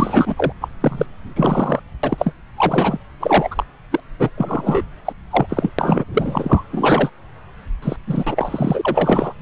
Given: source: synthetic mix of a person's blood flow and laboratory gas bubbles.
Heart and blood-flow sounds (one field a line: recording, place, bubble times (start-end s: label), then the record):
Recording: Doppler ultrasound of blood flow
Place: subclavian vein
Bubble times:
0.00-0.52 s: bubbles
0.60-0.69 s: bubbles
0.80-1.06 s: bubbles
1.35-1.80 s: bubbles
2.03-2.33 s: bubbles
2.57-2.99 s: bubbles
3.20-3.63 s: bubbles
3.91-4.00 s: bubbles
4.19-4.30 s: bubbles
4.37-4.83 s: bubbles
5.05-5.13 s: bubbles
5.30-5.71 s: bubbles
5.79-6.04 s: bubbles
6.13-6.64 s: bubbles
6.70-7.09 s: bubbles
7.82-7.96 s: bubbles
8.06-9.33 s: bubbles
From the record:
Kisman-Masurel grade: 243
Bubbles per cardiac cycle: several, 3 to 8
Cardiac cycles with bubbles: 100%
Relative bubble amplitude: loud (0.450 to 0.775)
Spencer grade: 3 (all of the cardiac periods contain showers or single bubble signals, but not dominating or overriding the cardiac motion signals)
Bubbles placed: anywhere in the cardiac cycle